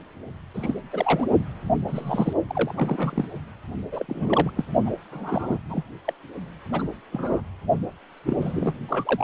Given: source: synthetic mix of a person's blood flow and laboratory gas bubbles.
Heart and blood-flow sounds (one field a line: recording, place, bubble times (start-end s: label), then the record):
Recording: Doppler ultrasound of blood flow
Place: precordium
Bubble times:
0.54-0.74 s: bubbles
0.93-1.28 s: bubbles
1.87-2.33 s: bubbles
2.48-3.25 s: bubbles
3.92-4.05 s: bubbles
4.08-4.50 s: bubbles
4.55-4.65 s: bubbles
4.86-4.92 s: bubbles
5.11-5.58 s: bubbles
5.70-5.83 s: bubbles
6.04-6.13 s: bubbles
6.72-6.85 s: bubbles
7.11-7.41 s: bubbles
8.26-8.37 s: bubbles
8.40-8.75 s: bubbles
8.88-9.24 s: bubbles
From the record:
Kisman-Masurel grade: 232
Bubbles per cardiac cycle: several, 3 to 8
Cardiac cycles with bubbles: 50 to 99%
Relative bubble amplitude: moderate (0.250 to 0.450)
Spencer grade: 3 (all of the cardiac periods contain showers or single bubble signals, but not dominating or overriding the cardiac motion signals)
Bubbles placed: only in the low amplitude regions of the cardiac cycle